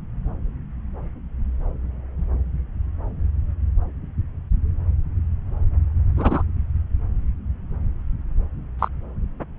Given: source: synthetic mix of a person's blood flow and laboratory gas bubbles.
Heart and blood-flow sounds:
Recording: Doppler ultrasound of blood flow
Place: subclavian vein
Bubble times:
6.17-6.42 s: bubbles
8.79-8.88 s: bubbles
From the record:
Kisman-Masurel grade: 123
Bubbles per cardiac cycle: 1 to 2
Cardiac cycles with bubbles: 10 to 50%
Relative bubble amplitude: loud (0.450 to 0.775)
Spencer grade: 2 (many but less than half of the cardiac periods contain bubble signals, singularly or in groups)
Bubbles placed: anywhere in the cardiac cycle

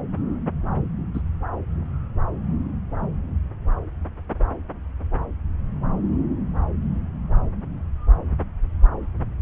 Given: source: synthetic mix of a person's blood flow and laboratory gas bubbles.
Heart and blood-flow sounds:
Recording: Doppler ultrasound of blood flow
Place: subclavian vein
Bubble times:
1.14-1.22 s: bubbles
From the record:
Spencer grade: 1 (occasional bubble signal discernible with the cardiac motion signal, with majority of cardiac periods free of bubbles)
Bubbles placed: anywhere in the cardiac cycle

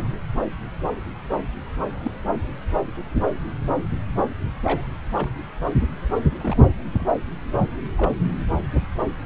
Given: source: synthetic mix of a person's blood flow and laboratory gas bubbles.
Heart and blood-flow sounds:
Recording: Doppler ultrasound of blood flow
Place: subclavian vein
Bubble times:
2.03-2.11 s: bubbles
4.63-4.87 s: bubbles
5.16-5.29 s: bubbles
6.40-6.66 s: bubbles
6.93-7.08 s: bubbles
7.97-8.12 s: bubbles
From the record:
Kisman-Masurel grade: 121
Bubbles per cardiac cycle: 1 to 2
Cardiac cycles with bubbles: 10 to 50%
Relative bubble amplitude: barely perceptible (0.100 to 0.250)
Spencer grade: 2 (many but less than half of the cardiac periods contain bubble signals, singularly or in groups)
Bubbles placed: anywhere in the cardiac cycle

